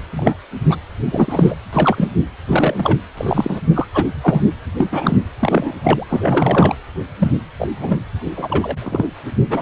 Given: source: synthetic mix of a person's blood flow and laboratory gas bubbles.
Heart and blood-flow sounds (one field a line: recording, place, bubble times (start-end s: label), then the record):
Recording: Doppler ultrasound of blood flow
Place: precordium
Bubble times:
0.12-0.36 s: bubbles
0.69-0.76 s: bubbles
1.05-1.55 s: bubbles
1.72-2.08 s: bubbles
2.48-2.98 s: bubbles
3.17-3.60 s: bubbles
3.72-3.87 s: bubbles
3.94-4.08 s: bubbles
4.21-4.42 s: bubbles
4.76-4.89 s: bubbles
4.92-5.17 s: bubbles
5.39-5.74 s: bubbles
5.83-6.04 s: bubbles
6.09-6.75 s: bubbles
7.18-7.31 s: bubbles
7.58-7.68 s: bubbles
7.80-7.98 s: bubbles
8.37-9.09 s: bubbles
9.49-9.62 s: bubbles
From the record:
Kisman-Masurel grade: 243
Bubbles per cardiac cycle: several, 3 to 8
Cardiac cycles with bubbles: 100%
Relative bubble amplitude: loud (0.450 to 0.775)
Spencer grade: 3 (all of the cardiac periods contain showers or single bubble signals, but not dominating or overriding the cardiac motion signals)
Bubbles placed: anywhere in the cardiac cycle